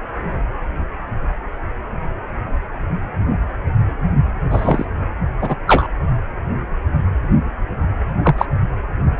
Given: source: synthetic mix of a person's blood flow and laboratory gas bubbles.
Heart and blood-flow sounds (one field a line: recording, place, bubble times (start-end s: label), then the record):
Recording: Doppler ultrasound of blood flow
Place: precordium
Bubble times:
4.50-4.85 s: bubbles
5.41-5.55 s: bubbles
5.67-5.88 s: bubbles
8.23-8.35 s: bubbles
8.38-8.46 s: bubbles
From the record:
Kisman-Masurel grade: 123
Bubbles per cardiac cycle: 1 to 2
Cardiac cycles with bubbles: 10 to 50%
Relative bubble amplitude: loud (0.450 to 0.775)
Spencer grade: 2 (many but less than half of the cardiac periods contain bubble signals, singularly or in groups)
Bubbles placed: anywhere in the cardiac cycle